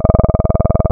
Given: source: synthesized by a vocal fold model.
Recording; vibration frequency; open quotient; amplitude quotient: sustained vowel; 20 Hz; 0.2; 1.4